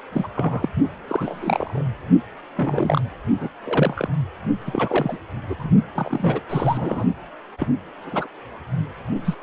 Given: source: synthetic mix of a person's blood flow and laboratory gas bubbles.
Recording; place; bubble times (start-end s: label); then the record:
Doppler ultrasound of blood flow; precordium
0.12-0.27 s: bubbles
0.35-0.68 s: bubbles
1.07-1.84 s: bubbles
2.57-3.02 s: bubbles
3.39-3.50 s: bubbles
3.64-4.09 s: bubbles
4.66-5.17 s: bubbles
5.49-5.55 s: bubbles
5.58-5.70 s: bubbles
5.95-6.40 s: bubbles
6.49-7.04 s: bubbles
7.57-7.68 s: bubbles
8.06-8.27 s: bubbles
9.25-9.35 s: bubbles
From the record:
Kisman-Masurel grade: 242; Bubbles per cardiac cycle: several, 3 to 8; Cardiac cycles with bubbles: 100%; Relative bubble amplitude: moderate (0.250 to 0.450); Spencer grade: 3 (all of the cardiac periods contain showers or single bubble signals, but not dominating or overriding the cardiac motion signals); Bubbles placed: only in the low amplitude regions of the cardiac cycle